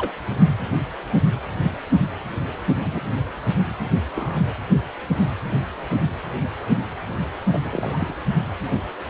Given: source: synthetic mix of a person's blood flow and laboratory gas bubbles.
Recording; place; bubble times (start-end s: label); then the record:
Doppler ultrasound of blood flow; precordium
0.00-0.11 s: bubbles
2.66-3.02 s: bubbles
4.16-4.42 s: bubbles
7.51-8.14 s: bubbles
From the record:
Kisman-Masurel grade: 121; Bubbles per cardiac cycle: 1 to 2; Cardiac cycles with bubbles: 10 to 50%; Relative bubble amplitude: barely perceptible (0.100 to 0.250); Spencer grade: 2 (many but less than half of the cardiac periods contain bubble signals, singularly or in groups); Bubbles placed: anywhere in the cardiac cycle